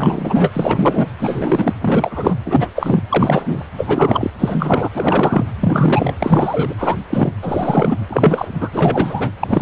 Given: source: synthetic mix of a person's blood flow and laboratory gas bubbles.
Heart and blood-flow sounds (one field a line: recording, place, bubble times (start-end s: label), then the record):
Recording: Doppler ultrasound of blood flow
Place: precordium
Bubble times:
0.00-0.51 s: bubbles
0.53-1.06 s: bubbles
1.19-1.72 s: bubbles
1.81-2.34 s: bubbles
2.46-2.69 s: bubbles
2.75-3.02 s: bubbles
3.09-3.63 s: bubbles
3.77-4.30 s: bubbles
4.38-4.89 s: bubbles
4.95-5.46 s: bubbles
5.61-6.15 s: bubbles
6.18-6.74 s: bubbles
6.78-6.96 s: bubbles
7.09-7.33 s: bubbles
7.42-7.98 s: bubbles
8.09-8.48 s: bubbles
8.61-8.69 s: bubbles
8.73-9.30 s: bubbles
9.41-9.62 s: bubbles
From the record:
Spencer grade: 3 (all of the cardiac periods contain showers or single bubble signals, but not dominating or overriding the cardiac motion signals)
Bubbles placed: anywhere in the cardiac cycle